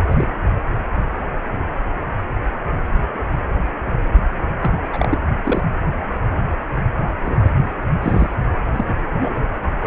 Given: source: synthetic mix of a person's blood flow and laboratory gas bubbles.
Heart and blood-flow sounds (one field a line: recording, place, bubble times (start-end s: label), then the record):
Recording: Doppler ultrasound of blood flow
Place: precordium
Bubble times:
0.00-0.28 s: bubbles
4.59-4.71 s: bubbles
4.92-5.19 s: bubbles
5.45-5.62 s: bubbles
7.25-7.42 s: bubbles
7.45-7.50 s: bubbles
7.58-7.67 s: bubbles
8.01-8.28 s: bubbles
8.72-8.84 s: bubbles
8.98-9.40 s: bubbles
9.79-9.87 s: bubbles
From the record:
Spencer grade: 3 (all of the cardiac periods contain showers or single bubble signals, but not dominating or overriding the cardiac motion signals)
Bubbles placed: anywhere in the cardiac cycle